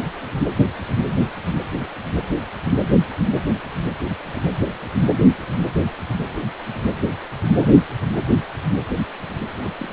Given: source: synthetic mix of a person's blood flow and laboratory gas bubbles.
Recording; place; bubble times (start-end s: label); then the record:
Doppler ultrasound of blood flow; precordium
2.93-2.96 s: bubbles
7.60-7.67 s: bubbles
9.60-9.71 s: bubbles
9.79-9.93 s: bubbles
From the record:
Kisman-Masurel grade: 121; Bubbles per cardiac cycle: 1 to 2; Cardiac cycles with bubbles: 10 to 50%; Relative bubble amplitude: barely perceptible (0.100 to 0.250); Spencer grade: 2 (many but less than half of the cardiac periods contain bubble signals, singularly or in groups); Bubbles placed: anywhere in the cardiac cycle